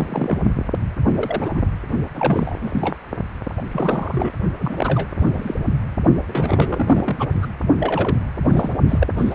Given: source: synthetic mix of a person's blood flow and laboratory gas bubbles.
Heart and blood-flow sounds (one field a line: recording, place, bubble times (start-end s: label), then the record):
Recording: Doppler ultrasound of blood flow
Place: precordium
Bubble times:
0.00-0.38 s: bubbles
1.16-1.50 s: bubbles
1.55-1.62 s: bubbles
2.15-2.96 s: bubbles
3.56-3.61 s: bubbles
3.71-4.30 s: bubbles
4.58-5.10 s: bubbles
5.19-5.54 s: bubbles
5.66-5.75 s: bubbles
6.28-7.29 s: bubbles
7.42-7.46 s: bubbles
7.79-8.18 s: bubbles
8.49-8.70 s: bubbles
8.89-9.08 s: bubbles
9.17-9.35 s: bubbles
From the record:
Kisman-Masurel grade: 242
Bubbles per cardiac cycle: several, 3 to 8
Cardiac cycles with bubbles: 100%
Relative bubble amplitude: moderate (0.250 to 0.450)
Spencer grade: 3 (all of the cardiac periods contain showers or single bubble signals, but not dominating or overriding the cardiac motion signals)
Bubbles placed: only in the low amplitude regions of the cardiac cycle